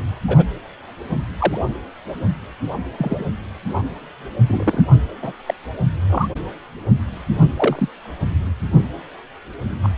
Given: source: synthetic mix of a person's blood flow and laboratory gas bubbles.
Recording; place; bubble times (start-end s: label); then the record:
Doppler ultrasound of blood flow; precordium
0.27-0.45 s: bubbles
1.37-1.67 s: bubbles
2.98-3.24 s: bubbles
4.47-4.83 s: bubbles
5.22-5.33 s: bubbles
5.47-5.54 s: bubbles
6.10-6.28 s: bubbles
7.56-7.88 s: bubbles
9.83-9.89 s: bubbles
From the record:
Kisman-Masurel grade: 122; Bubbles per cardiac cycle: 1 to 2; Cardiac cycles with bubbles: 10 to 50%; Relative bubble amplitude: moderate (0.250 to 0.450); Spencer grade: 2 (many but less than half of the cardiac periods contain bubble signals, singularly or in groups); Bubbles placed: anywhere in the cardiac cycle